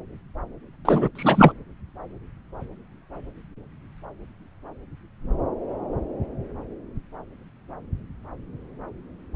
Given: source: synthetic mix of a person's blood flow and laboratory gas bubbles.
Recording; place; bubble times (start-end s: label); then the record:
Doppler ultrasound of blood flow; subclavian vein
0.85-1.08 s: bubbles
1.15-1.52 s: bubbles
From the record:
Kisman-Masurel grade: 213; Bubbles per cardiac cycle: several, 3 to 8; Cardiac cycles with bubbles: 1 to 10%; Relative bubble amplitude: loud (0.450 to 0.775); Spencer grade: 1 (occasional bubble signal discernible with the cardiac motion signal, with majority of cardiac periods free of bubbles); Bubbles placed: anywhere in the cardiac cycle